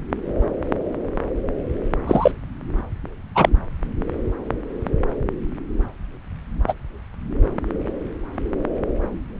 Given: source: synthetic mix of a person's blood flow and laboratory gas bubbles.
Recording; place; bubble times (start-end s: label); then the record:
Doppler ultrasound of blood flow; subclavian vein
2.06-2.31 s: bubbles
3.34-3.49 s: bubbles
6.67-6.73 s: bubbles
From the record:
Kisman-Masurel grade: 123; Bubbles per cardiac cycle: 1 to 2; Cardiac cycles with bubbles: 10 to 50%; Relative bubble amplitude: loud (0.450 to 0.775); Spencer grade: 2 (many but less than half of the cardiac periods contain bubble signals, singularly or in groups); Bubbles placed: anywhere in the cardiac cycle